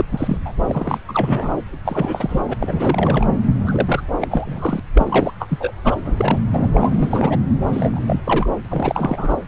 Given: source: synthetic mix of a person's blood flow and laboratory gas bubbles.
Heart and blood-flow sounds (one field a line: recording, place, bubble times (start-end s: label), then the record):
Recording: Doppler ultrasound of blood flow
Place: subclavian vein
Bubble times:
0.00-0.04 s: bubbles
0.11-0.37 s: bubbles
0.45-0.52 s: bubbles
0.67-0.98 s: bubbles
1.07-1.63 s: bubbles
1.85-2.41 s: bubbles
2.44-2.54 s: bubbles
2.60-3.27 s: bubbles
3.67-4.01 s: bubbles
4.21-4.79 s: bubbles
4.95-5.33 s: bubbles
5.40-5.71 s: bubbles
5.84-5.95 s: bubbles
6.04-6.14 s: bubbles
6.17-6.38 s: bubbles
6.53-6.70 s: bubbles
6.74-7.38 s: bubbles
7.69-8.00 s: bubbles
8.06-8.20 s: bubbles
8.24-8.49 s: bubbles
8.64-9.34 s: bubbles
From the record:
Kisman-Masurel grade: 342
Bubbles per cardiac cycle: rolling drumbeat, 9 or more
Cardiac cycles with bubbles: 100%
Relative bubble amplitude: moderate (0.250 to 0.450)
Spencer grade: 3 (all of the cardiac periods contain showers or single bubble signals, but not dominating or overriding the cardiac motion signals)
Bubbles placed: anywhere in the cardiac cycle